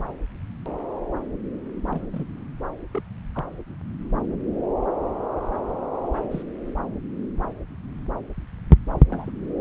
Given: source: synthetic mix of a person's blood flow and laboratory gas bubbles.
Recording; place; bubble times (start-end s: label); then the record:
Doppler ultrasound of blood flow; subclavian vein
1.91-2.25 s: bubbles
2.95-3.01 s: bubbles
3.35-3.44 s: bubbles
6.21-6.42 s: bubbles
9.10-9.30 s: bubbles
From the record:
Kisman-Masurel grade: 121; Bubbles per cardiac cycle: 1 to 2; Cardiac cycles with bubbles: 10 to 50%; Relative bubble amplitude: barely perceptible (0.100 to 0.250); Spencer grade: 2 (many but less than half of the cardiac periods contain bubble signals, singularly or in groups); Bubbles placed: anywhere in the cardiac cycle